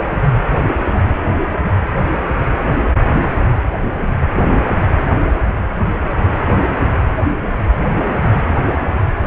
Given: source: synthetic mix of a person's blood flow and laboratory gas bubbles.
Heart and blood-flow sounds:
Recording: Doppler ultrasound of blood flow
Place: precordium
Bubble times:
7.24-7.61 s: bubbles
7.90-7.95 s: bubbles
From the record:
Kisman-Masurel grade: 111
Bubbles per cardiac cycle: 1 to 2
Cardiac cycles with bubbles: 1 to 10%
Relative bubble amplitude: barely perceptible (0.100 to 0.250)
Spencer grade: 1 (occasional bubble signal discernible with the cardiac motion signal, with majority of cardiac periods free of bubbles)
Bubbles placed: anywhere in the cardiac cycle

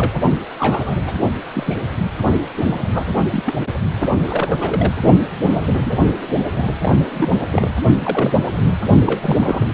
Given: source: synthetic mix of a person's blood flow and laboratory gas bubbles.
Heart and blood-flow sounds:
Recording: Doppler ultrasound of blood flow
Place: precordium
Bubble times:
0.00-0.21 s: bubbles
0.57-1.16 s: bubbles
1.53-1.82 s: bubbles
1.97-2.07 s: bubbles
2.56-2.88 s: bubbles
2.92-3.23 s: bubbles
3.32-3.54 s: bubbles
4.27-4.93 s: bubbles
5.45-5.97 s: bubbles
6.56-6.67 s: bubbles
6.82-6.96 s: bubbles
7.12-7.29 s: bubbles
7.51-7.71 s: bubbles
8.03-8.33 s: bubbles
8.38-8.43 s: bubbles
8.64-8.71 s: bubbles
9.05-9.67 s: bubbles
From the record:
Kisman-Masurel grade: 232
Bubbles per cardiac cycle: several, 3 to 8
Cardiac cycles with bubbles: 50 to 99%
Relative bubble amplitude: moderate (0.250 to 0.450)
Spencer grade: 3 (all of the cardiac periods contain showers or single bubble signals, but not dominating or overriding the cardiac motion signals)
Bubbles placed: only in the low amplitude regions of the cardiac cycle

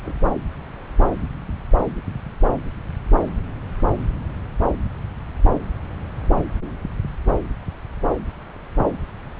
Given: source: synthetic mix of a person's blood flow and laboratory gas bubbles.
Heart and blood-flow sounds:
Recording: Doppler ultrasound of blood flow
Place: subclavian vein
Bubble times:
0.05-0.14 s: bubbles
From the record:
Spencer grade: 2 (many but less than half of the cardiac periods contain bubble signals, singularly or in groups)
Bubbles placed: anywhere in the cardiac cycle

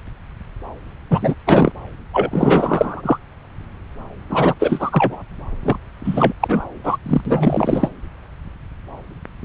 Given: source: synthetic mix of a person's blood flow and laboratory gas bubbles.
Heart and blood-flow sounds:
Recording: Doppler ultrasound of blood flow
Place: subclavian vein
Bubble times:
1.10-1.35 s: bubbles
1.46-1.72 s: bubbles
2.12-3.18 s: bubbles
4.29-4.54 s: bubbles
4.59-5.17 s: bubbles
5.63-5.77 s: bubbles
6.04-6.33 s: bubbles
6.40-6.65 s: bubbles
6.84-6.96 s: bubbles
7.05-7.21 s: bubbles
7.25-7.89 s: bubbles
From the record:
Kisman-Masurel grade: 333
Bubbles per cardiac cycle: rolling drumbeat, 9 or more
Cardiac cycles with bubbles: 50 to 99%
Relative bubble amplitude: loud (0.450 to 0.775)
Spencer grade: 3 (all of the cardiac periods contain showers or single bubble signals, but not dominating or overriding the cardiac motion signals)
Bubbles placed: anywhere in the cardiac cycle

